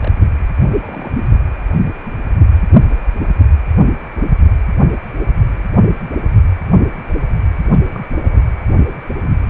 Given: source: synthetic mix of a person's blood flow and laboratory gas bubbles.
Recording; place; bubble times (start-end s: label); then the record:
Doppler ultrasound of blood flow; precordium
0.00-0.11 s: bubbles
0.78-1.18 s: bubbles
7.69-7.80 s: bubbles
7.92-8.44 s: bubbles
8.48-8.53 s: bubbles
From the record:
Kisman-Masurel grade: 221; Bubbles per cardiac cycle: several, 3 to 8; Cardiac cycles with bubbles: 10 to 50%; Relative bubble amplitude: barely perceptible (0.100 to 0.250); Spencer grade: 2 (many but less than half of the cardiac periods contain bubble signals, singularly or in groups); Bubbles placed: anywhere in the cardiac cycle